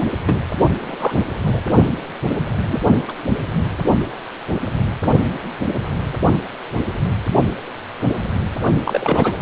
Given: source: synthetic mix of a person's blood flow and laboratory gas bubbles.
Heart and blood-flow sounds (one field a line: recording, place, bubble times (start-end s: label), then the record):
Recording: Doppler ultrasound of blood flow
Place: precordium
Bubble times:
0.27-0.42 s: bubbles
0.77-1.20 s: bubbles
1.44-1.62 s: bubbles
2.68-2.83 s: bubbles
2.90-2.96 s: bubbles
3.08-3.12 s: bubbles
8.84-9.37 s: bubbles
From the record:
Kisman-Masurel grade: 232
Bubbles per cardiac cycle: several, 3 to 8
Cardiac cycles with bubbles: 50 to 99%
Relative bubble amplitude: moderate (0.250 to 0.450)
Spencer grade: 3 (all of the cardiac periods contain showers or single bubble signals, but not dominating or overriding the cardiac motion signals)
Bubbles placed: only in the low amplitude regions of the cardiac cycle